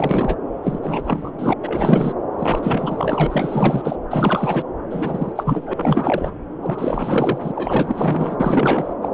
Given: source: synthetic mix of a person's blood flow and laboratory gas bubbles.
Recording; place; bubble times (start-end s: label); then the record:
Doppler ultrasound of blood flow; subclavian vein
0.00-0.36 s: bubbles
0.63-0.80 s: bubbles
0.82-1.31 s: bubbles
1.39-1.54 s: bubbles
1.63-2.13 s: bubbles
2.38-3.96 s: bubbles
4.10-4.62 s: bubbles
4.90-5.33 s: bubbles
5.35-6.31 s: bubbles
6.62-7.52 s: bubbles
7.55-8.37 s: bubbles
8.40-8.94 s: bubbles
9.02-9.09 s: bubbles
9.12-9.14 s: bubbles
From the record:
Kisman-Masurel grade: 444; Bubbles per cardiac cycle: continuous sound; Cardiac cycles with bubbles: 100%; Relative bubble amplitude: maximal (0.775 to 0.999); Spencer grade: 4 (maximum detectable bubble signal sounding continuously throughout systole and diastole of every cardiac period, and overriding the amplitude of the normal cardiac signals); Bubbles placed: anywhere in the cardiac cycle